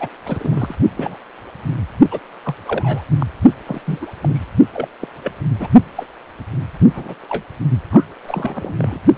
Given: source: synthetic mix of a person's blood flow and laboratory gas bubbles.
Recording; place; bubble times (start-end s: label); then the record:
Doppler ultrasound of blood flow; precordium
0.00-0.09 s: bubbles
0.26-0.76 s: bubbles
0.97-1.19 s: bubbles
2.11-2.19 s: bubbles
2.44-2.54 s: bubbles
2.66-3.05 s: bubbles
3.20-3.26 s: bubbles
3.66-3.82 s: bubbles
3.85-4.05 s: bubbles
4.21-4.45 s: bubbles
4.74-4.88 s: bubbles
5.00-5.08 s: bubbles
5.24-5.32 s: bubbles
5.59-5.67 s: bubbles
5.95-6.07 s: bubbles
6.95-7.15 s: bubbles
7.29-7.44 s: bubbles
7.90-8.04 s: bubbles
8.27-8.74 s: bubbles
8.78-8.98 s: bubbles
9.16-9.18 s: bubbles
From the record:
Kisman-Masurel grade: 242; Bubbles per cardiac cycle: several, 3 to 8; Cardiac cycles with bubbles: 100%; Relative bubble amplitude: moderate (0.250 to 0.450); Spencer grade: 3 (all of the cardiac periods contain showers or single bubble signals, but not dominating or overriding the cardiac motion signals); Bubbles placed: only in the low amplitude regions of the cardiac cycle